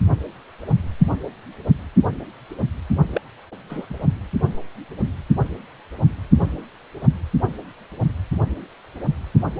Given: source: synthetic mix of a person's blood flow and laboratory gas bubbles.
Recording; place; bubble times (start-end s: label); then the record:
Doppler ultrasound of blood flow; precordium
3.13-3.21 s: bubbles
3.69-3.86 s: bubbles
3.90-3.95 s: bubbles
From the record:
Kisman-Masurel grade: 212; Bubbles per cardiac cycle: several, 3 to 8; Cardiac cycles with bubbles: 1 to 10%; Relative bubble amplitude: moderate (0.250 to 0.450); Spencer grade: 1 (occasional bubble signal discernible with the cardiac motion signal, with majority of cardiac periods free of bubbles); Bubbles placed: only in the low amplitude regions of the cardiac cycle